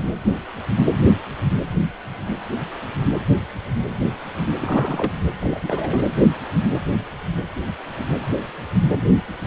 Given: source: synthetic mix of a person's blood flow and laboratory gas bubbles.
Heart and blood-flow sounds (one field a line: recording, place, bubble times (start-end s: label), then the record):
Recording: Doppler ultrasound of blood flow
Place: precordium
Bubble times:
4.56-5.12 s: bubbles
5.39-6.04 s: bubbles
From the record:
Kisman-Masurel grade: 211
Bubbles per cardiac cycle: several, 3 to 8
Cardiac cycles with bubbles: 1 to 10%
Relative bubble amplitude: barely perceptible (0.100 to 0.250)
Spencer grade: 1 (occasional bubble signal discernible with the cardiac motion signal, with majority of cardiac periods free of bubbles)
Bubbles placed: anywhere in the cardiac cycle